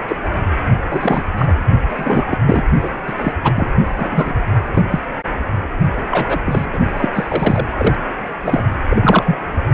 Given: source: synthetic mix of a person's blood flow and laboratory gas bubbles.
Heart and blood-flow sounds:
Doppler ultrasound of blood flow; precordium
0.07-0.16 s: bubbles
0.89-1.25 s: bubbles
1.38-1.56 s: bubbles
1.90-2.39 s: bubbles
2.46-2.63 s: bubbles
2.83-2.90 s: bubbles
3.06-3.13 s: bubbles
3.18-3.33 s: bubbles
3.43-3.71 s: bubbles
3.96-4.33 s: bubbles
4.75-4.83 s: bubbles
4.90-5.00 s: bubbles
6.11-6.40 s: bubbles
6.44-6.79 s: bubbles
6.96-7.08 s: bubbles
7.13-7.65 s: bubbles
7.77-7.95 s: bubbles
8.42-8.63 s: bubbles
8.89-9.36 s: bubbles
From the record:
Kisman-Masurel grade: 243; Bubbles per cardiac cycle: several, 3 to 8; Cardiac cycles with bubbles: 100%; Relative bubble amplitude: loud (0.450 to 0.775); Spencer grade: 3 (all of the cardiac periods contain showers or single bubble signals, but not dominating or overriding the cardiac motion signals); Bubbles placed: only in the low amplitude regions of the cardiac cycle

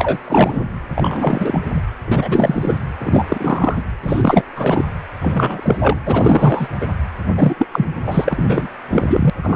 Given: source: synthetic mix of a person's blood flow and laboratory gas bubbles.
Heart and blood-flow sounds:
Doppler ultrasound of blood flow; precordium
0.00-0.17 s: bubbles
0.22-0.60 s: bubbles
0.98-1.60 s: bubbles
1.69-1.81 s: bubbles
2.06-2.78 s: bubbles
2.99-3.25 s: bubbles
3.29-3.83 s: bubbles
4.02-4.44 s: bubbles
4.55-4.84 s: bubbles
5.21-5.98 s: bubbles
6.05-6.68 s: bubbles
6.80-6.88 s: bubbles
7.36-7.55 s: bubbles
7.58-7.66 s: bubbles
7.71-7.87 s: bubbles
8.04-8.67 s: bubbles
8.89-9.30 s: bubbles
9.43-9.55 s: bubbles
From the record:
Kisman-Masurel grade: 343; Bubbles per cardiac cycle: rolling drumbeat, 9 or more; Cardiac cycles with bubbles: 100%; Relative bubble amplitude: loud (0.450 to 0.775); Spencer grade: 3 (all of the cardiac periods contain showers or single bubble signals, but not dominating or overriding the cardiac motion signals); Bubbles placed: anywhere in the cardiac cycle

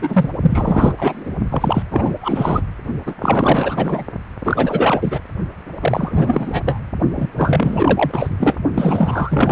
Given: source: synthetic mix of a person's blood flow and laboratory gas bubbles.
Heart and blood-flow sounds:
Doppler ultrasound of blood flow; precordium
0.01-0.33 s: bubbles
0.41-0.93 s: bubbles
0.98-1.32 s: bubbles
1.49-1.82 s: bubbles
1.91-2.15 s: bubbles
2.21-2.61 s: bubbles
3.06-3.14 s: bubbles
3.20-4.05 s: bubbles
4.44-5.21 s: bubbles
5.80-6.62 s: bubbles
6.64-6.80 s: bubbles
7.16-7.32 s: bubbles
7.37-8.30 s: bubbles
8.40-8.57 s: bubbles
8.74-9.52 s: bubbles
From the record:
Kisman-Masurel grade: 444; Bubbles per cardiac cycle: continuous sound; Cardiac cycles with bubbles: 100%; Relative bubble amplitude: maximal (0.775 to 0.999); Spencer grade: 4 (maximum detectable bubble signal sounding continuously throughout systole and diastole of every cardiac period, and overriding the amplitude of the normal cardiac signals); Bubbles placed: only in the low amplitude regions of the cardiac cycle

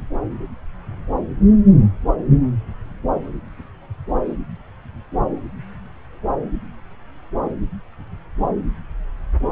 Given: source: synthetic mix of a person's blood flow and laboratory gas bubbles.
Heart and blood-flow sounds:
Doppler ultrasound of blood flow; subclavian vein
no bubbles
From the record:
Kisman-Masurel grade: 000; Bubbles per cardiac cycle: 0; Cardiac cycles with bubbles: 0%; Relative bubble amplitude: no bubbles discernible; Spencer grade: 0 (complete lack of bubble signals)

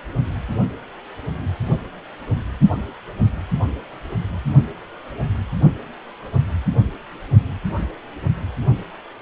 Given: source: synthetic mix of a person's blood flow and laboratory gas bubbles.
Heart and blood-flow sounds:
Doppler ultrasound of blood flow; precordium
no bubbles
From the record:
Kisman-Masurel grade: 000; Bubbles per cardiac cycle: 0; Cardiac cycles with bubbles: 0%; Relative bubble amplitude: no bubbles discernible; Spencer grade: 0 (complete lack of bubble signals)

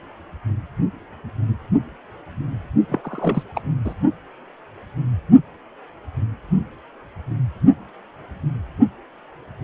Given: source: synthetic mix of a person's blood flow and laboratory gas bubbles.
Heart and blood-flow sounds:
Doppler ultrasound of blood flow; precordium
2.89-3.01 s: bubbles
3.04-3.43 s: bubbles
3.54-3.60 s: bubbles
3.85-3.94 s: bubbles
From the record:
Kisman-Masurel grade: 212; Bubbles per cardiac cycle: several, 3 to 8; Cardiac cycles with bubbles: 1 to 10%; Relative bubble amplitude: moderate (0.250 to 0.450); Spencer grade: 1 (occasional bubble signal discernible with the cardiac motion signal, with majority of cardiac periods free of bubbles); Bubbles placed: only in the low amplitude regions of the cardiac cycle

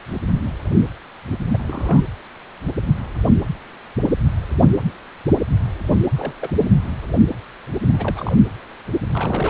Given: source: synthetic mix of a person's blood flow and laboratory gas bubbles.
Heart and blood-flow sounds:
Doppler ultrasound of blood flow; precordium
1.49-1.62 s: bubbles
1.68-2.01 s: bubbles
6.14-6.34 s: bubbles
6.41-6.51 s: bubbles
7.93-8.32 s: bubbles
9.12-9.50 s: bubbles
From the record:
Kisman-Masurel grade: 221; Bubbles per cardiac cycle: several, 3 to 8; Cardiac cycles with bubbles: 10 to 50%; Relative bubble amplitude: barely perceptible (0.100 to 0.250); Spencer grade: 2 (many but less than half of the cardiac periods contain bubble signals, singularly or in groups); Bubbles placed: anywhere in the cardiac cycle

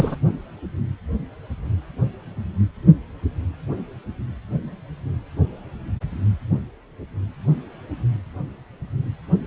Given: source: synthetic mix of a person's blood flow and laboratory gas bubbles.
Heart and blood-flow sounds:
Doppler ultrasound of blood flow; precordium
0.00-0.17 s: bubbles
From the record:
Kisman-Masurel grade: 223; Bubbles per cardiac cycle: several, 3 to 8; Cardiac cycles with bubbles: 10 to 50%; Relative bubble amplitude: loud (0.450 to 0.775); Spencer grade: 2 (many but less than half of the cardiac periods contain bubble signals, singularly or in groups); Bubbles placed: anywhere in the cardiac cycle

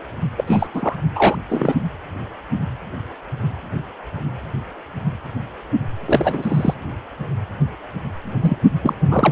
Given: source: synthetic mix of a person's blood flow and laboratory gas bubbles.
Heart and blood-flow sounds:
Doppler ultrasound of blood flow; precordium
0.36-0.67 s: bubbles
0.74-0.95 s: bubbles
1.15-1.36 s: bubbles
1.49-1.75 s: bubbles
6.05-6.75 s: bubbles
8.41-8.58 s: bubbles
8.82-8.95 s: bubbles
9.11-9.32 s: bubbles
From the record:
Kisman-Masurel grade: 222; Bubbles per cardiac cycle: several, 3 to 8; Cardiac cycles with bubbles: 10 to 50%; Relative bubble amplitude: moderate (0.250 to 0.450); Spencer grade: 2 (many but less than half of the cardiac periods contain bubble signals, singularly or in groups); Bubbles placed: anywhere in the cardiac cycle

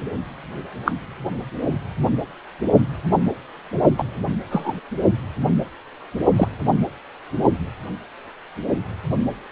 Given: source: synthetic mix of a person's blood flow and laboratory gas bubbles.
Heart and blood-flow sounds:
Doppler ultrasound of blood flow; precordium
0.85-0.92 s: bubbles
3.98-4.04 s: bubbles
4.50-4.73 s: bubbles
6.36-6.48 s: bubbles
From the record:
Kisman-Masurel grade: 123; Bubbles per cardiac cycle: 1 to 2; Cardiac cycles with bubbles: 10 to 50%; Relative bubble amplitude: loud (0.450 to 0.775); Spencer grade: 2 (many but less than half of the cardiac periods contain bubble signals, singularly or in groups); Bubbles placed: only in the low amplitude regions of the cardiac cycle

